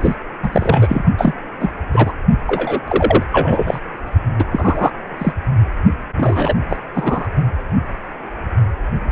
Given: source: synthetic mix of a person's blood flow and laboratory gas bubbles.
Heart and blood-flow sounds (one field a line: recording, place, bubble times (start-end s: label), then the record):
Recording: Doppler ultrasound of blood flow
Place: precordium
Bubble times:
0.02-0.15 s: bubbles
0.42-1.04 s: bubbles
1.18-1.34 s: bubbles
1.59-1.72 s: bubbles
1.93-2.12 s: bubbles
2.47-2.80 s: bubbles
2.88-3.23 s: bubbles
3.31-3.80 s: bubbles
4.38-4.45 s: bubbles
4.51-4.91 s: bubbles
5.19-5.33 s: bubbles
6.17-6.54 s: bubbles
6.69-6.76 s: bubbles
6.94-7.27 s: bubbles
From the record:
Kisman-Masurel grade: 233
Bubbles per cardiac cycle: several, 3 to 8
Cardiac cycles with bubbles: 50 to 99%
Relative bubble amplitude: loud (0.450 to 0.775)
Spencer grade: 3 (all of the cardiac periods contain showers or single bubble signals, but not dominating or overriding the cardiac motion signals)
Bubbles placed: only in the low amplitude regions of the cardiac cycle